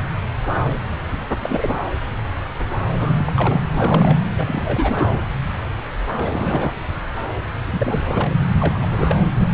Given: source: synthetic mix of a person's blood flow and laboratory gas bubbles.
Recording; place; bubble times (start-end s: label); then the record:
Doppler ultrasound of blood flow; subclavian vein
1.43-1.75 s: bubbles
1.86-1.90 s: bubbles
2.92-3.31 s: bubbles
3.34-3.61 s: bubbles
3.71-4.17 s: bubbles
4.38-5.10 s: bubbles
6.18-6.74 s: bubbles
7.67-8.33 s: bubbles
8.60-9.16 s: bubbles
9.38-9.48 s: bubbles
From the record:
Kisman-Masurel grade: 332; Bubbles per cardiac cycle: rolling drumbeat, 9 or more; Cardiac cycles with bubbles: 50 to 99%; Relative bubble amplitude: moderate (0.250 to 0.450); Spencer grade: 3 (all of the cardiac periods contain showers or single bubble signals, but not dominating or overriding the cardiac motion signals); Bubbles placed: anywhere in the cardiac cycle